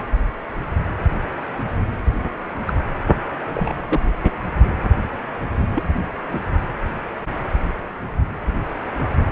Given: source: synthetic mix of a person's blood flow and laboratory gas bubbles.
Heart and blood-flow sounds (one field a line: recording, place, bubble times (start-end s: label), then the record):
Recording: Doppler ultrasound of blood flow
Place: precordium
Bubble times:
2.66-2.75 s: bubbles
3.54-4.00 s: bubbles
5.75-5.83 s: bubbles
6.31-6.40 s: bubbles
From the record:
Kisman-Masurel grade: 122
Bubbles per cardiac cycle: 1 to 2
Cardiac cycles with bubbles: 10 to 50%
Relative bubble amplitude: moderate (0.250 to 0.450)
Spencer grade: 2 (many but less than half of the cardiac periods contain bubble signals, singularly or in groups)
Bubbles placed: anywhere in the cardiac cycle